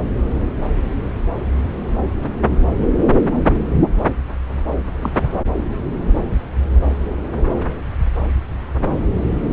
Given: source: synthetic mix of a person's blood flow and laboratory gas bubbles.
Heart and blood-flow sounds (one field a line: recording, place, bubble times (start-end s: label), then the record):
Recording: Doppler ultrasound of blood flow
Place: subclavian vein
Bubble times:
5.01-5.18 s: bubbles
From the record:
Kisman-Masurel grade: 112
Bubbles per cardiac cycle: 1 to 2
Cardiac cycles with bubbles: 1 to 10%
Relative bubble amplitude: moderate (0.250 to 0.450)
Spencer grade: 1 (occasional bubble signal discernible with the cardiac motion signal, with majority of cardiac periods free of bubbles)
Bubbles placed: anywhere in the cardiac cycle